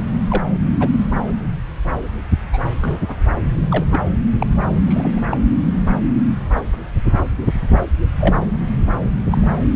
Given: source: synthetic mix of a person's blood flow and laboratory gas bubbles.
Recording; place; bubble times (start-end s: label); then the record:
Doppler ultrasound of blood flow; subclavian vein
0.29-0.42 s: bubbles
0.80-0.88 s: bubbles
2.52-2.58 s: bubbles
2.80-2.99 s: bubbles
3.08-3.15 s: bubbles
3.71-3.86 s: bubbles
3.92-4.00 s: bubbles
4.39-4.47 s: bubbles
4.87-5.22 s: bubbles
5.31-5.38 s: bubbles
8.20-8.35 s: bubbles
9.30-9.47 s: bubbles
From the record:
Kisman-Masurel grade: 122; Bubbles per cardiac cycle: 1 to 2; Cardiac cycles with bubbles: 10 to 50%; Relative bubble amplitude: moderate (0.250 to 0.450); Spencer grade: 2 (many but less than half of the cardiac periods contain bubble signals, singularly or in groups); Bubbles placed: anywhere in the cardiac cycle